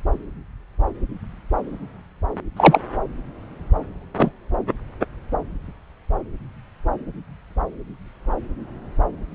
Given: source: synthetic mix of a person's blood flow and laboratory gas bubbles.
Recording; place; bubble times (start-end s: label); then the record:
Doppler ultrasound of blood flow; subclavian vein
2.56-2.80 s: bubbles
4.17-4.31 s: bubbles
From the record:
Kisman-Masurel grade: 113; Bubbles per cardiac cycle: 1 to 2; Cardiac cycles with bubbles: 1 to 10%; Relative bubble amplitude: loud (0.450 to 0.775); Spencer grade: 1 (occasional bubble signal discernible with the cardiac motion signal, with majority of cardiac periods free of bubbles); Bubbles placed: anywhere in the cardiac cycle